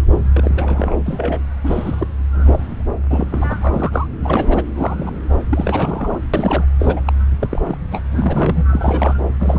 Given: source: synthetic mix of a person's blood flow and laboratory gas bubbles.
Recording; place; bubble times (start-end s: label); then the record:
Doppler ultrasound of blood flow; subclavian vein
0.34-0.96 s: bubbles
1.06-1.40 s: bubbles
1.63-2.07 s: bubbles
2.34-2.84 s: bubbles
3.11-3.27 s: bubbles
3.32-3.57 s: bubbles
3.61-4.08 s: bubbles
4.23-4.67 s: bubbles
4.75-5.12 s: bubbles
5.50-6.19 s: bubbles
6.33-6.65 s: bubbles
6.79-7.00 s: bubbles
7.07-7.13 s: bubbles
7.40-7.48 s: bubbles
7.51-7.78 s: bubbles
7.91-8.02 s: bubbles
8.11-8.64 s: bubbles
8.69-9.14 s: bubbles
9.39-9.59 s: bubbles
From the record:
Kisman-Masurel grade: 242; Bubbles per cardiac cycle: several, 3 to 8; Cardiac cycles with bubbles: 100%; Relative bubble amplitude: moderate (0.250 to 0.450); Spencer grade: 3 (all of the cardiac periods contain showers or single bubble signals, but not dominating or overriding the cardiac motion signals); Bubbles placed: anywhere in the cardiac cycle